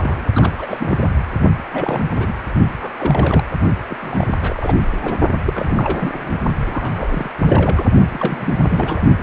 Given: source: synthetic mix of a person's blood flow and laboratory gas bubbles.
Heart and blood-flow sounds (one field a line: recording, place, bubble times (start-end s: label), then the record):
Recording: Doppler ultrasound of blood flow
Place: precordium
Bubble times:
0.00-0.23 s: bubbles
0.33-0.55 s: bubbles
0.58-1.18 s: bubbles
1.72-2.08 s: bubbles
2.15-2.34 s: bubbles
2.80-2.92 s: bubbles
2.97-3.44 s: bubbles
3.90-3.95 s: bubbles
4.00-4.75 s: bubbles
5.00-5.17 s: bubbles
5.46-6.39 s: bubbles
6.66-7.29 s: bubbles
7.39-7.85 s: bubbles
8.12-9.02 s: bubbles
From the record:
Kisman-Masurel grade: 342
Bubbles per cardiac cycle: rolling drumbeat, 9 or more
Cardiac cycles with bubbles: 100%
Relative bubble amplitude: moderate (0.250 to 0.450)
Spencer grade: 3 (all of the cardiac periods contain showers or single bubble signals, but not dominating or overriding the cardiac motion signals)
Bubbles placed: only in the low amplitude regions of the cardiac cycle